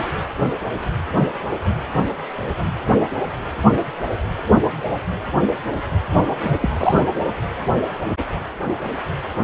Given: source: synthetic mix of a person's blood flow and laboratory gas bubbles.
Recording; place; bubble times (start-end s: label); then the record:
Doppler ultrasound of blood flow; precordium
6.38-6.58 s: bubbles
6.60-7.08 s: bubbles
From the record:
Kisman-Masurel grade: 212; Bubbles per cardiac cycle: several, 3 to 8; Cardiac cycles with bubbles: 1 to 10%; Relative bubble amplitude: moderate (0.250 to 0.450); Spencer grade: 1 (occasional bubble signal discernible with the cardiac motion signal, with majority of cardiac periods free of bubbles); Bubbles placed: anywhere in the cardiac cycle